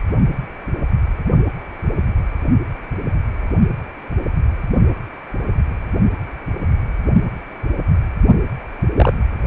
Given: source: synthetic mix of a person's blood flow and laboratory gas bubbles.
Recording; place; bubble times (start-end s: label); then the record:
Doppler ultrasound of blood flow; precordium
8.96-9.13 s: bubbles
From the record:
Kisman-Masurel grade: 113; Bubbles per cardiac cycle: 1 to 2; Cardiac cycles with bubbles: 1 to 10%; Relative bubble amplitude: loud (0.450 to 0.775); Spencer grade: 1 (occasional bubble signal discernible with the cardiac motion signal, with majority of cardiac periods free of bubbles); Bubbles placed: only in the low amplitude regions of the cardiac cycle